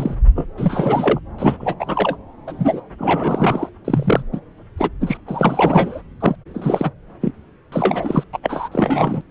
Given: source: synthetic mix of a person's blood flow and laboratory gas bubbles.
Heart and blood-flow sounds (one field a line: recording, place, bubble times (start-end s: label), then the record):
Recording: Doppler ultrasound of blood flow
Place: subclavian vein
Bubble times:
0.00-0.15 s: bubbles
0.35-0.46 s: bubbles
0.57-1.20 s: bubbles
1.38-1.56 s: bubbles
1.60-1.75 s: bubbles
1.79-2.17 s: bubbles
2.47-2.81 s: bubbles
2.98-3.70 s: bubbles
3.84-4.23 s: bubbles
4.32-4.40 s: bubbles
4.77-4.89 s: bubbles
5.00-5.17 s: bubbles
5.28-6.01 s: bubbles
6.20-6.35 s: bubbles
6.54-6.91 s: bubbles
7.21-7.31 s: bubbles
7.72-8.24 s: bubbles
8.33-8.38 s: bubbles
8.42-8.69 s: bubbles
8.71-9.21 s: bubbles
From the record:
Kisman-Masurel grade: 343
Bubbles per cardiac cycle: rolling drumbeat, 9 or more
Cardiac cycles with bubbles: 100%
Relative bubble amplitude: loud (0.450 to 0.775)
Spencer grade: 3 (all of the cardiac periods contain showers or single bubble signals, but not dominating or overriding the cardiac motion signals)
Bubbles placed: anywhere in the cardiac cycle